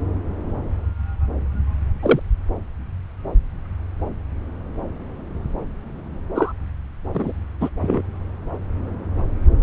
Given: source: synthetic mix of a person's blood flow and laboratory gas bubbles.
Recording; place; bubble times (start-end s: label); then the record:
Doppler ultrasound of blood flow; subclavian vein
2.02-2.19 s: bubbles
6.34-6.52 s: bubbles
7.14-7.32 s: bubbles
7.60-7.69 s: bubbles
7.81-8.02 s: bubbles
From the record:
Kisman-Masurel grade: 123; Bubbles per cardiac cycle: 1 to 2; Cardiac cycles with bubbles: 10 to 50%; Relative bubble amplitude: loud (0.450 to 0.775); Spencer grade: 2 (many but less than half of the cardiac periods contain bubble signals, singularly or in groups); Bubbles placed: anywhere in the cardiac cycle